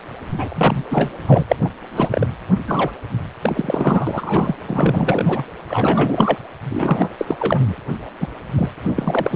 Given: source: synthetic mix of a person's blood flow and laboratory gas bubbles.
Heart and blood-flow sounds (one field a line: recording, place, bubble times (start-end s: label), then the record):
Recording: Doppler ultrasound of blood flow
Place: precordium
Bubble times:
0.37-0.85 s: bubbles
0.89-1.11 s: bubbles
1.27-1.43 s: bubbles
1.48-1.56 s: bubbles
1.64-1.69 s: bubbles
1.86-2.29 s: bubbles
2.67-2.92 s: bubbles
3.42-4.55 s: bubbles
4.67-5.45 s: bubbles
5.68-6.38 s: bubbles
6.70-7.09 s: bubbles
7.18-7.36 s: bubbles
7.39-7.75 s: bubbles
8.20-8.27 s: bubbles
8.55-8.71 s: bubbles
8.88-9.36 s: bubbles
From the record:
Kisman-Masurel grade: 343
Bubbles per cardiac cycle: rolling drumbeat, 9 or more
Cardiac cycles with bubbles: 100%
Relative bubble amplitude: loud (0.450 to 0.775)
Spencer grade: 3 (all of the cardiac periods contain showers or single bubble signals, but not dominating or overriding the cardiac motion signals)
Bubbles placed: anywhere in the cardiac cycle